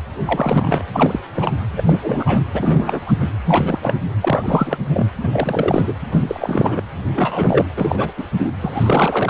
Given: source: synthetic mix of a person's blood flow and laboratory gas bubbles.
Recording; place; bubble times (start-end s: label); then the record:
Doppler ultrasound of blood flow; precordium
0.25-0.83 s: bubbles
0.93-1.19 s: bubbles
1.34-1.52 s: bubbles
1.76-1.83 s: bubbles
1.85-2.43 s: bubbles
2.54-3.00 s: bubbles
3.06-3.12 s: bubbles
3.20-3.31 s: bubbles
3.46-3.77 s: bubbles
3.81-3.94 s: bubbles
4.22-4.78 s: bubbles
4.88-5.04 s: bubbles
5.23-5.93 s: bubbles
6.11-6.82 s: bubbles
7.13-7.65 s: bubbles
7.77-8.12 s: bubbles
8.17-8.27 s: bubbles
8.38-8.52 s: bubbles
8.59-9.30 s: bubbles
From the record:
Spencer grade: 3 (all of the cardiac periods contain showers or single bubble signals, but not dominating or overriding the cardiac motion signals); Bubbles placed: anywhere in the cardiac cycle